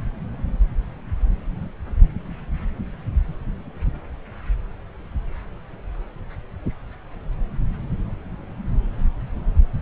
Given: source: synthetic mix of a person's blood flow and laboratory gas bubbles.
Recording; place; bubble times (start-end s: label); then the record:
Doppler ultrasound of blood flow; subclavian vein
no bubbles
From the record:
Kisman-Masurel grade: 000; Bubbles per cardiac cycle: 0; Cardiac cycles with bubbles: 0%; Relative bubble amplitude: no bubbles discernible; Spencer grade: 0 (complete lack of bubble signals)